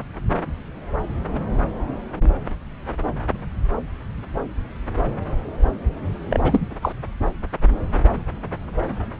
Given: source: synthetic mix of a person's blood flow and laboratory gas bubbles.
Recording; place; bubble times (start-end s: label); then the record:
Doppler ultrasound of blood flow; subclavian vein
6.29-6.40 s: bubbles
6.42-6.78 s: bubbles
6.82-6.92 s: bubbles
From the record:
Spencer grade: 1 (occasional bubble signal discernible with the cardiac motion signal, with majority of cardiac periods free of bubbles); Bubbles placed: anywhere in the cardiac cycle